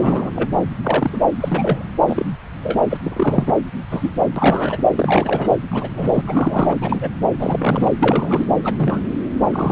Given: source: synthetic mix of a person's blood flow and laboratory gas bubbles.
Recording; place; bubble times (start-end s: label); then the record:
Doppler ultrasound of blood flow; subclavian vein
0.00-0.30 s: bubbles
0.35-0.51 s: bubbles
0.84-1.21 s: bubbles
1.40-1.85 s: bubbles
2.06-2.25 s: bubbles
2.63-2.79 s: bubbles
2.90-2.98 s: bubbles
3.04-3.53 s: bubbles
3.89-4.10 s: bubbles
4.36-4.83 s: bubbles
4.95-5.56 s: bubbles
5.71-6.21 s: bubbles
6.26-6.77 s: bubbles
6.81-7.09 s: bubbles
7.39-7.92 s: bubbles
8.00-8.46 s: bubbles
8.62-9.01 s: bubbles
9.45-9.72 s: bubbles
From the record:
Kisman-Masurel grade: 232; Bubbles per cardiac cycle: several, 3 to 8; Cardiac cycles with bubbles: 50 to 99%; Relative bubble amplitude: moderate (0.250 to 0.450); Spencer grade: 3 (all of the cardiac periods contain showers or single bubble signals, but not dominating or overriding the cardiac motion signals); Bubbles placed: anywhere in the cardiac cycle